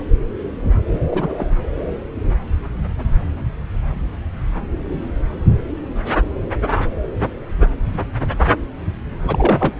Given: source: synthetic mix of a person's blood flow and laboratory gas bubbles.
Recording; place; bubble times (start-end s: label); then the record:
Doppler ultrasound of blood flow; subclavian vein
1.07-1.33 s: bubbles
1.38-1.45 s: bubbles
9.23-9.75 s: bubbles
From the record:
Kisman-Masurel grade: 223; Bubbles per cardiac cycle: several, 3 to 8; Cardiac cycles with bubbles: 10 to 50%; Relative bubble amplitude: loud (0.450 to 0.775); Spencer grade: 2 (many but less than half of the cardiac periods contain bubble signals, singularly or in groups); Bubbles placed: anywhere in the cardiac cycle